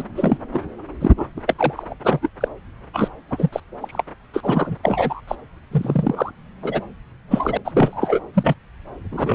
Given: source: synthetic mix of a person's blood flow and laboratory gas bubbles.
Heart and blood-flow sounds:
Doppler ultrasound of blood flow; subclavian vein
0.00-0.03 s: bubbles
0.16-0.37 s: bubbles
0.53-0.60 s: bubbles
1.00-1.11 s: bubbles
1.17-1.26 s: bubbles
1.36-1.40 s: bubbles
1.47-1.54 s: bubbles
1.58-1.94 s: bubbles
2.04-2.19 s: bubbles
2.22-2.29 s: bubbles
2.40-2.48 s: bubbles
2.94-3.08 s: bubbles
3.31-3.49 s: bubbles
3.52-3.60 s: bubbles
3.81-4.02 s: bubbles
4.33-4.75 s: bubbles
4.83-5.21 s: bubbles
5.27-5.35 s: bubbles
5.71-6.31 s: bubbles
6.62-6.81 s: bubbles
7.29-7.57 s: bubbles
7.64-8.20 s: bubbles
8.33-8.54 s: bubbles
9.12-9.35 s: bubbles
From the record:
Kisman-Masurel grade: 242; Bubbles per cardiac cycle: several, 3 to 8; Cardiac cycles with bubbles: 100%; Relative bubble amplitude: moderate (0.250 to 0.450); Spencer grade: 3 (all of the cardiac periods contain showers or single bubble signals, but not dominating or overriding the cardiac motion signals); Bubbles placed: anywhere in the cardiac cycle

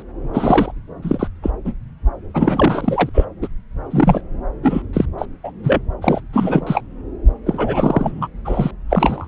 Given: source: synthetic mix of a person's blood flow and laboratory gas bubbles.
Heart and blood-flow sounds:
Doppler ultrasound of blood flow; subclavian vein
0.00-0.03 s: bubbles
0.32-0.72 s: bubbles
1.02-1.27 s: bubbles
1.43-1.50 s: bubbles
1.65-1.73 s: bubbles
2.34-3.10 s: bubbles
3.14-3.25 s: bubbles
3.42-3.48 s: bubbles
3.90-4.21 s: bubbles
4.62-4.82 s: bubbles
4.93-5.05 s: bubbles
5.18-5.25 s: bubbles
5.43-5.51 s: bubbles
5.63-5.82 s: bubbles
6.01-6.21 s: bubbles
6.33-6.83 s: bubbles
7.46-8.28 s: bubbles
8.45-8.71 s: bubbles
8.89-9.28 s: bubbles
From the record:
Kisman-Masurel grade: 343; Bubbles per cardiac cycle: rolling drumbeat, 9 or more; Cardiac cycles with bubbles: 100%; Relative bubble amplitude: loud (0.450 to 0.775); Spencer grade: 3 (all of the cardiac periods contain showers or single bubble signals, but not dominating or overriding the cardiac motion signals); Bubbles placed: anywhere in the cardiac cycle

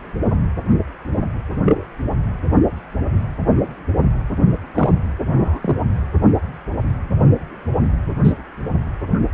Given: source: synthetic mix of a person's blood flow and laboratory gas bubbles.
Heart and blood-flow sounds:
Doppler ultrasound of blood flow; precordium
1.65-1.84 s: bubbles
4.75-4.92 s: bubbles
5.31-5.59 s: bubbles
5.62-5.77 s: bubbles
8.24-8.34 s: bubbles
From the record:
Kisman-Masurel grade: 122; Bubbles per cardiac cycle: 1 to 2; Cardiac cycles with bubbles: 10 to 50%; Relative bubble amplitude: moderate (0.250 to 0.450); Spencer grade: 2 (many but less than half of the cardiac periods contain bubble signals, singularly or in groups); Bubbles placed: anywhere in the cardiac cycle

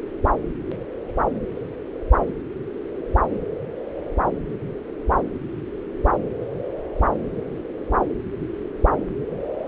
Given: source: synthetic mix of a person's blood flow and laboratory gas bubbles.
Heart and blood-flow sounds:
Doppler ultrasound of blood flow; subclavian vein
no bubbles
From the record:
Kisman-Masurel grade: 000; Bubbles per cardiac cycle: 0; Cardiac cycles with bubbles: 0%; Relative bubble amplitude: no bubbles discernible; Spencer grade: 0 (complete lack of bubble signals)

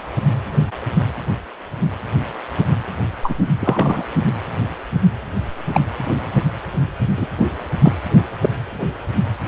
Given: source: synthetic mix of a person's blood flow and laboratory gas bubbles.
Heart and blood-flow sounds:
Doppler ultrasound of blood flow; precordium
3.22-3.35 s: bubbles
3.61-4.04 s: bubbles
5.72-5.80 s: bubbles
7.17-7.27 s: bubbles
7.38-7.46 s: bubbles
7.82-7.92 s: bubbles
8.42-8.49 s: bubbles
From the record:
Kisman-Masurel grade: 123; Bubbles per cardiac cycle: 1 to 2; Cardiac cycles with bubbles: 10 to 50%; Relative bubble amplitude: loud (0.450 to 0.775); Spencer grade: 2 (many but less than half of the cardiac periods contain bubble signals, singularly or in groups); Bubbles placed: anywhere in the cardiac cycle

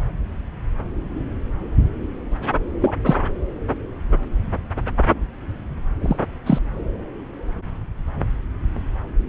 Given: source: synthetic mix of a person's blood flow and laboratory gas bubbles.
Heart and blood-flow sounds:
Doppler ultrasound of blood flow; subclavian vein
2.80-2.95 s: bubbles
3.05-3.15 s: bubbles
6.01-6.17 s: bubbles
6.46-6.59 s: bubbles
From the record:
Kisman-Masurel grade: 123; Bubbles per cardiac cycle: 1 to 2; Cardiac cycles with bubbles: 10 to 50%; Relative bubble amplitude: loud (0.450 to 0.775); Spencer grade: 2 (many but less than half of the cardiac periods contain bubble signals, singularly or in groups); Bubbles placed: anywhere in the cardiac cycle

